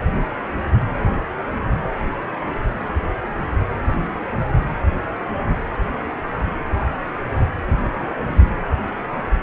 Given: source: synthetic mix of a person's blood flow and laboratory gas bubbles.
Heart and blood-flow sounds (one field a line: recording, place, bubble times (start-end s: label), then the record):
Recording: Doppler ultrasound of blood flow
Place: precordium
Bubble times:
6.83-6.89 s: bubbles
7.66-8.12 s: bubbles
8.21-8.38 s: bubbles
From the record:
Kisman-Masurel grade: 121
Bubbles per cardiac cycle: 1 to 2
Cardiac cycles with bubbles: 10 to 50%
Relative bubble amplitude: barely perceptible (0.100 to 0.250)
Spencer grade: 2 (many but less than half of the cardiac periods contain bubble signals, singularly or in groups)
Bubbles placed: anywhere in the cardiac cycle